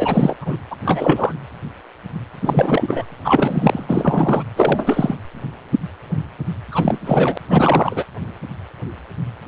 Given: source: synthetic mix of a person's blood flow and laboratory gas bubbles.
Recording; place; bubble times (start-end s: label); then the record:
Doppler ultrasound of blood flow; precordium
0.00-0.35 s: bubbles
0.40-0.59 s: bubbles
0.70-0.76 s: bubbles
0.85-1.32 s: bubbles
2.42-3.06 s: bubbles
3.25-3.86 s: bubbles
3.88-4.43 s: bubbles
4.55-5.16 s: bubbles
6.71-7.38 s: bubbles
7.49-8.04 s: bubbles
From the record:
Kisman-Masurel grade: 333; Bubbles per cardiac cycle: rolling drumbeat, 9 or more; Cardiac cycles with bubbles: 50 to 99%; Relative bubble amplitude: loud (0.450 to 0.775); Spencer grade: 3 (all of the cardiac periods contain showers or single bubble signals, but not dominating or overriding the cardiac motion signals); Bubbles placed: anywhere in the cardiac cycle